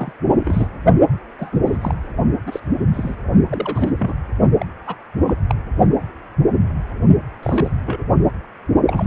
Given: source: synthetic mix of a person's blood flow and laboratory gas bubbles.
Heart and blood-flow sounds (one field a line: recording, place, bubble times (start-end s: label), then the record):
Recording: Doppler ultrasound of blood flow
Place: precordium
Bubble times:
0.00-0.12 s: bubbles
0.34-0.68 s: bubbles
1.39-1.50 s: bubbles
1.52-1.59 s: bubbles
1.66-1.78 s: bubbles
1.81-1.95 s: bubbles
2.46-2.60 s: bubbles
2.91-3.16 s: bubbles
3.49-3.92 s: bubbles
3.98-4.14 s: bubbles
4.59-4.65 s: bubbles
4.87-4.96 s: bubbles
5.26-5.34 s: bubbles
5.47-5.55 s: bubbles
7.42-7.71 s: bubbles
7.86-8.04 s: bubbles
8.87-9.07 s: bubbles
From the record:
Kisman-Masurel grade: 232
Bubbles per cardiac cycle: several, 3 to 8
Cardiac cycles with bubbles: 50 to 99%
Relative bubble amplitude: moderate (0.250 to 0.450)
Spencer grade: 3 (all of the cardiac periods contain showers or single bubble signals, but not dominating or overriding the cardiac motion signals)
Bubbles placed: only in the low amplitude regions of the cardiac cycle